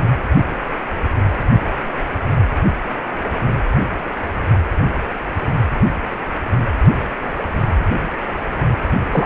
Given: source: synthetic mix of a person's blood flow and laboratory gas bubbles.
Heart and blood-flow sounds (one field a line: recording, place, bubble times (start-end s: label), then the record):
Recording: Doppler ultrasound of blood flow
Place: precordium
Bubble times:
9.11-9.26 s: bubbles
From the record:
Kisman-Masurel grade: 113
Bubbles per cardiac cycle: 1 to 2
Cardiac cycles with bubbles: 1 to 10%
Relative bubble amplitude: loud (0.450 to 0.775)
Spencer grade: 1 (occasional bubble signal discernible with the cardiac motion signal, with majority of cardiac periods free of bubbles)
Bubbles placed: anywhere in the cardiac cycle